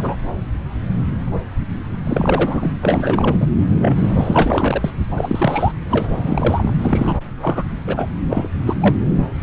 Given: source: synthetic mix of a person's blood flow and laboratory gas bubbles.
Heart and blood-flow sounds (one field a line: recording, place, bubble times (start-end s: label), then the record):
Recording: Doppler ultrasound of blood flow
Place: subclavian vein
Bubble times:
0.00-0.15 s: bubbles
2.06-2.78 s: bubbles
2.83-3.48 s: bubbles
3.79-4.91 s: bubbles
5.17-5.73 s: bubbles
5.89-6.73 s: bubbles
6.79-7.17 s: bubbles
7.42-7.63 s: bubbles
7.87-8.09 s: bubbles
8.30-8.48 s: bubbles
8.66-8.74 s: bubbles
8.80-8.97 s: bubbles
From the record:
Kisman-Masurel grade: 332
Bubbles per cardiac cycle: rolling drumbeat, 9 or more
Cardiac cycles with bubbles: 50 to 99%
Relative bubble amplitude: moderate (0.250 to 0.450)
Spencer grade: 3 (all of the cardiac periods contain showers or single bubble signals, but not dominating or overriding the cardiac motion signals)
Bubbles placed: anywhere in the cardiac cycle